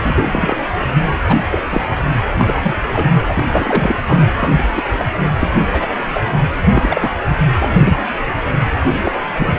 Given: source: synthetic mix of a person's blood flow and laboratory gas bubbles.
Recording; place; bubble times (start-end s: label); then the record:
Doppler ultrasound of blood flow; precordium
0.04-0.13 s: bubbles
0.16-0.25 s: bubbles
0.32-0.56 s: bubbles
1.24-1.38 s: bubbles
1.50-1.58 s: bubbles
1.72-1.84 s: bubbles
2.37-2.75 s: bubbles
2.93-3.19 s: bubbles
3.27-4.03 s: bubbles
4.06-4.22 s: bubbles
4.38-4.63 s: bubbles
4.75-4.83 s: bubbles
4.98-5.04 s: bubbles
5.39-5.48 s: bubbles
5.71-5.93 s: bubbles
6.13-6.21 s: bubbles
6.71-7.12 s: bubbles
7.59-7.98 s: bubbles
8.93-9.12 s: bubbles
9.34-9.59 s: bubbles
From the record:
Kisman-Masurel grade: 243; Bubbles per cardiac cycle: several, 3 to 8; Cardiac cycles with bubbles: 100%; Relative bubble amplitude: loud (0.450 to 0.775); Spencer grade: 3 (all of the cardiac periods contain showers or single bubble signals, but not dominating or overriding the cardiac motion signals); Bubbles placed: anywhere in the cardiac cycle